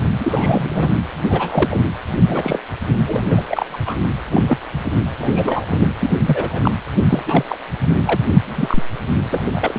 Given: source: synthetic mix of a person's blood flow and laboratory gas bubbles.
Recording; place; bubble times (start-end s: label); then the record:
Doppler ultrasound of blood flow; precordium
0.20-0.92 s: bubbles
1.29-1.81 s: bubbles
2.27-2.59 s: bubbles
3.05-3.80 s: bubbles
3.85-3.96 s: bubbles
4.32-4.58 s: bubbles
5.18-5.65 s: bubbles
5.69-5.92 s: bubbles
5.99-6.12 s: bubbles
6.25-6.71 s: bubbles
7.09-7.23 s: bubbles
7.26-7.45 s: bubbles
7.47-7.58 s: bubbles
7.93-8.20 s: bubbles
8.43-8.83 s: bubbles
9.29-9.51 s: bubbles
9.54-9.79 s: bubbles
From the record:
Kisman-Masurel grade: 242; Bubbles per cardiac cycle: several, 3 to 8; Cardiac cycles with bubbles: 100%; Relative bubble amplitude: moderate (0.250 to 0.450); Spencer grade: 3 (all of the cardiac periods contain showers or single bubble signals, but not dominating or overriding the cardiac motion signals); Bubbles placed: anywhere in the cardiac cycle